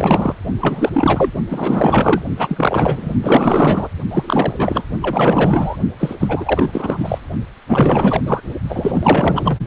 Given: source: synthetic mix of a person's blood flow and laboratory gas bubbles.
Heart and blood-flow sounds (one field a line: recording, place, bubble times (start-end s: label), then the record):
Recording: Doppler ultrasound of blood flow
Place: precordium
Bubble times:
0.00-0.35 s: bubbles
0.61-1.31 s: bubbles
1.50-2.22 s: bubbles
2.38-3.13 s: bubbles
3.22-3.89 s: bubbles
4.11-4.83 s: bubbles
5.02-5.77 s: bubbles
6.00-6.15 s: bubbles
6.20-7.18 s: bubbles
7.69-8.21 s: bubbles
8.25-8.40 s: bubbles
8.69-9.57 s: bubbles
From the record:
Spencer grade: 4 (maximum detectable bubble signal sounding continuously throughout systole and diastole of every cardiac period, and overriding the amplitude of the normal cardiac signals)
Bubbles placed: only in the low amplitude regions of the cardiac cycle